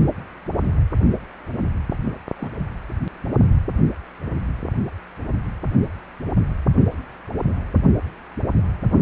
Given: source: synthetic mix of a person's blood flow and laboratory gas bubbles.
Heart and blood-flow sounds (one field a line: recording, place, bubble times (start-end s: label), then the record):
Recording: Doppler ultrasound of blood flow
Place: precordium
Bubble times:
2.39-2.54 s: bubbles
2.58-2.67 s: bubbles
From the record:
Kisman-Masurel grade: 221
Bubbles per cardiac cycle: several, 3 to 8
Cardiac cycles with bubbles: 10 to 50%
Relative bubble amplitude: barely perceptible (0.100 to 0.250)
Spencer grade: 2 (many but less than half of the cardiac periods contain bubble signals, singularly or in groups)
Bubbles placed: only in the low amplitude regions of the cardiac cycle